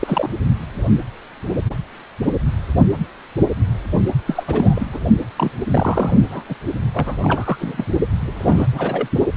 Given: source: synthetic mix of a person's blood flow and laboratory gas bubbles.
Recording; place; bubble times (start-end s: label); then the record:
Doppler ultrasound of blood flow; precordium
0.01-0.29 s: bubbles
4.26-4.43 s: bubbles
4.47-4.87 s: bubbles
4.92-4.99 s: bubbles
5.37-5.51 s: bubbles
5.71-6.27 s: bubbles
6.30-6.43 s: bubbles
6.49-6.55 s: bubbles
6.94-7.84 s: bubbles
8.26-9.08 s: bubbles
From the record:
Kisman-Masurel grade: 332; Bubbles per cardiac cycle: rolling drumbeat, 9 or more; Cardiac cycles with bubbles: 50 to 99%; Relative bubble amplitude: moderate (0.250 to 0.450); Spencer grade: 3 (all of the cardiac periods contain showers or single bubble signals, but not dominating or overriding the cardiac motion signals); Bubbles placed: only in the low amplitude regions of the cardiac cycle